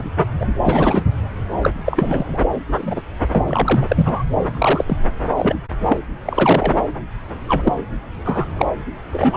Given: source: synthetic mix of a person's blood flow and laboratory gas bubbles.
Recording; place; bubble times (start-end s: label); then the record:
Doppler ultrasound of blood flow; subclavian vein
0.00-0.10 s: bubbles
0.40-0.46 s: bubbles
0.64-1.05 s: bubbles
1.62-1.71 s: bubbles
1.85-2.40 s: bubbles
2.73-3.02 s: bubbles
3.32-3.45 s: bubbles
3.48-4.24 s: bubbles
4.50-4.97 s: bubbles
5.37-5.55 s: bubbles
5.88-5.97 s: bubbles
6.25-6.80 s: bubbles
7.47-7.72 s: bubbles
8.24-8.45 s: bubbles
8.59-8.65 s: bubbles
9.12-9.37 s: bubbles
From the record:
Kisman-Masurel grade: 243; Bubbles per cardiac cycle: several, 3 to 8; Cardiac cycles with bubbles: 100%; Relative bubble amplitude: loud (0.450 to 0.775); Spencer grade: 3 (all of the cardiac periods contain showers or single bubble signals, but not dominating or overriding the cardiac motion signals); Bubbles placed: anywhere in the cardiac cycle